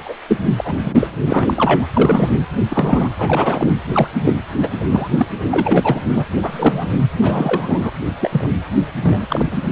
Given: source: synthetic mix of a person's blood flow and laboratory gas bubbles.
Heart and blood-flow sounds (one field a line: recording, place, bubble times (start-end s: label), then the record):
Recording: Doppler ultrasound of blood flow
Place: precordium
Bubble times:
0.05-0.14 s: bubbles
0.28-0.38 s: bubbles
0.57-1.07 s: bubbles
1.27-1.85 s: bubbles
1.94-2.30 s: bubbles
2.70-3.10 s: bubbles
3.18-3.71 s: bubbles
3.85-4.07 s: bubbles
4.24-4.36 s: bubbles
4.61-4.70 s: bubbles
4.90-5.07 s: bubbles
5.17-5.27 s: bubbles
5.51-6.25 s: bubbles
6.42-6.91 s: bubbles
7.20-7.90 s: bubbles
8.19-8.29 s: bubbles
8.31-8.49 s: bubbles
9.03-9.46 s: bubbles
9.50-9.61 s: bubbles
From the record:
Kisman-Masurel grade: 243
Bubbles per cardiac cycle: several, 3 to 8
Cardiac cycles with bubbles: 100%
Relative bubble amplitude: loud (0.450 to 0.775)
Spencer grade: 3 (all of the cardiac periods contain showers or single bubble signals, but not dominating or overriding the cardiac motion signals)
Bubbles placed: anywhere in the cardiac cycle